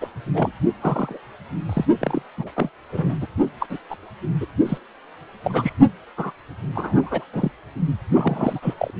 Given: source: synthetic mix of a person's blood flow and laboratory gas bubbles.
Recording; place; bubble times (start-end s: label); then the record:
Doppler ultrasound of blood flow; precordium
0.00-0.09 s: bubbles
0.34-0.52 s: bubbles
0.80-1.20 s: bubbles
1.69-1.86 s: bubbles
1.99-2.22 s: bubbles
2.38-2.49 s: bubbles
2.55-2.69 s: bubbles
2.92-3.17 s: bubbles
3.21-3.27 s: bubbles
3.60-3.67 s: bubbles
3.70-3.79 s: bubbles
3.90-3.96 s: bubbles
4.41-4.46 s: bubbles
4.65-4.78 s: bubbles
5.44-5.73 s: bubbles
6.17-6.32 s: bubbles
6.75-7.24 s: bubbles
7.33-7.52 s: bubbles
8.13-8.59 s: bubbles
8.62-8.74 s: bubbles
8.77-8.91 s: bubbles
From the record:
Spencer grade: 3 (all of the cardiac periods contain showers or single bubble signals, but not dominating or overriding the cardiac motion signals); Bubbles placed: only in the low amplitude regions of the cardiac cycle